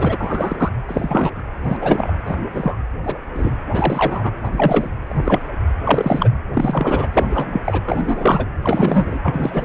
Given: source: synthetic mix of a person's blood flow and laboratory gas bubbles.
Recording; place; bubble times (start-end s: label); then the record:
Doppler ultrasound of blood flow; precordium
0.00-0.17 s: bubbles
0.20-0.69 s: bubbles
0.88-1.42 s: bubbles
1.63-1.76 s: bubbles
1.82-2.12 s: bubbles
2.25-2.37 s: bubbles
2.50-2.79 s: bubbles
3.03-3.18 s: bubbles
3.35-3.51 s: bubbles
3.72-4.31 s: bubbles
4.43-4.88 s: bubbles
5.08-5.46 s: bubbles
5.84-6.29 s: bubbles
6.54-7.08 s: bubbles
7.13-7.61 s: bubbles
7.64-7.81 s: bubbles
7.85-8.46 s: bubbles
8.63-9.19 s: bubbles
9.23-9.64 s: bubbles
From the record:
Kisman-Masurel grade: 243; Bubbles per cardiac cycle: several, 3 to 8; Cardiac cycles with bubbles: 100%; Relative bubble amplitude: loud (0.450 to 0.775); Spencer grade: 3 (all of the cardiac periods contain showers or single bubble signals, but not dominating or overriding the cardiac motion signals); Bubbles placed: anywhere in the cardiac cycle